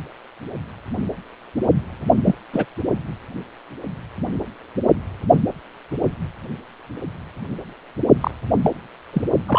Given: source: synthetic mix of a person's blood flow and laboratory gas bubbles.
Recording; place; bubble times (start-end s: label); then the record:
Doppler ultrasound of blood flow; precordium
2.25-2.38 s: bubbles
2.53-2.65 s: bubbles
8.21-8.31 s: bubbles
8.62-8.71 s: bubbles
9.12-9.22 s: bubbles
9.48-9.59 s: bubbles
From the record:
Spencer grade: 2 (many but less than half of the cardiac periods contain bubble signals, singularly or in groups); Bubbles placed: only in the low amplitude regions of the cardiac cycle